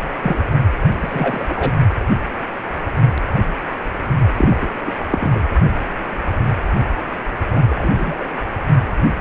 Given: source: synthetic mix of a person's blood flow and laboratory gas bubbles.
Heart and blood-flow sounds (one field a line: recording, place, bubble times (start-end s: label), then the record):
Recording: Doppler ultrasound of blood flow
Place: precordium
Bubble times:
0.00-0.09 s: bubbles
0.22-0.45 s: bubbles
0.97-1.72 s: bubbles
4.37-4.57 s: bubbles
4.61-4.68 s: bubbles
4.85-4.92 s: bubbles
5.10-5.41 s: bubbles
7.50-7.63 s: bubbles
7.69-8.15 s: bubbles
8.20-8.28 s: bubbles
From the record:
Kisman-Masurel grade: 223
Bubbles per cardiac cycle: several, 3 to 8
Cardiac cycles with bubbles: 10 to 50%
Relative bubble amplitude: loud (0.450 to 0.775)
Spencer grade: 2 (many but less than half of the cardiac periods contain bubble signals, singularly or in groups)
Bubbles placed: only in the low amplitude regions of the cardiac cycle